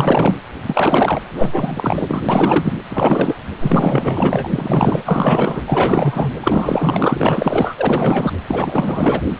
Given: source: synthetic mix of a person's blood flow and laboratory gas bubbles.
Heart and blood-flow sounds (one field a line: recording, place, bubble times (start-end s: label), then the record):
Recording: Doppler ultrasound of blood flow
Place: precordium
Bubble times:
0.00-0.35 s: bubbles
0.66-1.22 s: bubbles
1.35-2.22 s: bubbles
2.28-2.74 s: bubbles
2.90-3.35 s: bubbles
3.60-4.50 s: bubbles
4.53-5.02 s: bubbles
5.06-5.61 s: bubbles
5.67-6.33 s: bubbles
6.41-8.31 s: bubbles
8.46-9.22 s: bubbles
From the record:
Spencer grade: 4 (maximum detectable bubble signal sounding continuously throughout systole and diastole of every cardiac period, and overriding the amplitude of the normal cardiac signals)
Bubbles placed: anywhere in the cardiac cycle